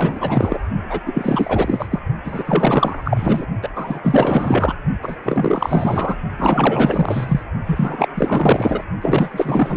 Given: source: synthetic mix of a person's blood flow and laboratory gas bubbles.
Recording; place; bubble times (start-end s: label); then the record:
Doppler ultrasound of blood flow; precordium
0.00-0.58 s: bubbles
0.90-1.00 s: bubbles
1.06-1.89 s: bubbles
1.91-2.01 s: bubbles
2.24-3.45 s: bubbles
3.62-3.69 s: bubbles
3.75-4.00 s: bubbles
4.04-4.75 s: bubbles
5.02-5.16 s: bubbles
5.22-6.16 s: bubbles
6.37-7.43 s: bubbles
7.66-8.09 s: bubbles
8.15-8.84 s: bubbles
9.02-9.77 s: bubbles
From the record:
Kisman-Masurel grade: 444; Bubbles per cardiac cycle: continuous sound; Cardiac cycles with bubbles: 100%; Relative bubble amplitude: maximal (0.775 to 0.999); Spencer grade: 4 (maximum detectable bubble signal sounding continuously throughout systole and diastole of every cardiac period, and overriding the amplitude of the normal cardiac signals); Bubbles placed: only in the low amplitude regions of the cardiac cycle